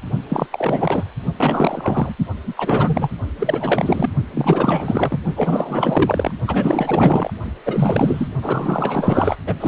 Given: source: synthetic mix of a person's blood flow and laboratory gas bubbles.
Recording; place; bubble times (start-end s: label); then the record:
Doppler ultrasound of blood flow; precordium
0.29-0.47 s: bubbles
0.51-1.04 s: bubbles
1.36-2.14 s: bubbles
2.46-2.54 s: bubbles
2.56-3.11 s: bubbles
3.39-4.10 s: bubbles
4.33-5.18 s: bubbles
5.35-6.33 s: bubbles
6.47-7.30 s: bubbles
7.64-8.28 s: bubbles
8.41-9.37 s: bubbles
9.46-9.54 s: bubbles
9.60-9.68 s: bubbles
From the record:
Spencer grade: 4 (maximum detectable bubble signal sounding continuously throughout systole and diastole of every cardiac period, and overriding the amplitude of the normal cardiac signals); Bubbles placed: only in the low amplitude regions of the cardiac cycle